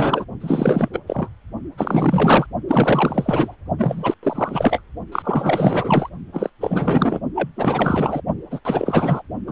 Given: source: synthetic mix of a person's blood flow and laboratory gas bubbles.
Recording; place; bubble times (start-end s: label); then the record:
Doppler ultrasound of blood flow; precordium
0.00-0.26 s: bubbles
0.40-0.89 s: bubbles
0.93-0.99 s: bubbles
1.07-1.29 s: bubbles
1.78-2.46 s: bubbles
2.67-3.56 s: bubbles
3.78-4.14 s: bubbles
4.23-4.82 s: bubbles
5.12-6.10 s: bubbles
6.33-6.50 s: bubbles
6.60-7.20 s: bubbles
7.35-7.50 s: bubbles
7.57-8.21 s: bubbles
8.51-8.60 s: bubbles
8.64-9.22 s: bubbles
9.46-9.52 s: bubbles
From the record:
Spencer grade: 4 (maximum detectable bubble signal sounding continuously throughout systole and diastole of every cardiac period, and overriding the amplitude of the normal cardiac signals); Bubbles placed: only in the low amplitude regions of the cardiac cycle